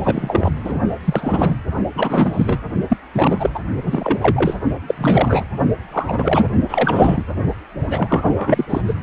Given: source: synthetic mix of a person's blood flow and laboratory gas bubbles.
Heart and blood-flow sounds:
Doppler ultrasound of blood flow; precordium
0.03-0.52 s: bubbles
0.62-0.80 s: bubbles
1.04-1.55 s: bubbles
1.94-2.58 s: bubbles
2.89-2.97 s: bubbles
3.12-3.50 s: bubbles
3.54-3.60 s: bubbles
3.82-4.57 s: bubbles
4.88-4.95 s: bubbles
4.98-5.46 s: bubbles
5.92-6.50 s: bubbles
6.69-7.24 s: bubbles
7.87-8.65 s: bubbles
8.69-8.81 s: bubbles
8.87-8.94 s: bubbles
From the record:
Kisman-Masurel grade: 343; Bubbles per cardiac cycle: rolling drumbeat, 9 or more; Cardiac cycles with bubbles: 100%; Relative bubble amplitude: loud (0.450 to 0.775); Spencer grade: 3 (all of the cardiac periods contain showers or single bubble signals, but not dominating or overriding the cardiac motion signals); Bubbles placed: only in the low amplitude regions of the cardiac cycle

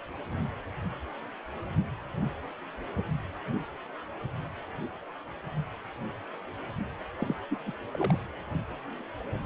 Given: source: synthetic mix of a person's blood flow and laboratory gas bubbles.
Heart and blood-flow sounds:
Doppler ultrasound of blood flow; precordium
7.20-7.36 s: bubbles
7.51-7.58 s: bubbles
7.66-7.73 s: bubbles
7.95-8.19 s: bubbles
From the record:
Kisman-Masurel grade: 211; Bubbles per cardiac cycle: several, 3 to 8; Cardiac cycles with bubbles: 1 to 10%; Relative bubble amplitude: barely perceptible (0.100 to 0.250); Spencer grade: 1 (occasional bubble signal discernible with the cardiac motion signal, with majority of cardiac periods free of bubbles); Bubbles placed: anywhere in the cardiac cycle

